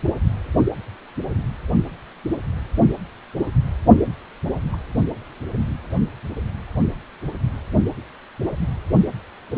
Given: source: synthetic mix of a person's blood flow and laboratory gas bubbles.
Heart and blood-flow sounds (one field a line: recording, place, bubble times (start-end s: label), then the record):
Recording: Doppler ultrasound of blood flow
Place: precordium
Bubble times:
4.72-4.76 s: bubbles
From the record:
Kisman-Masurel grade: 111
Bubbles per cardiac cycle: 1 to 2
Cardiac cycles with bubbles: 1 to 10%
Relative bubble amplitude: barely perceptible (0.100 to 0.250)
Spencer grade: 1 (occasional bubble signal discernible with the cardiac motion signal, with majority of cardiac periods free of bubbles)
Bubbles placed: only in the low amplitude regions of the cardiac cycle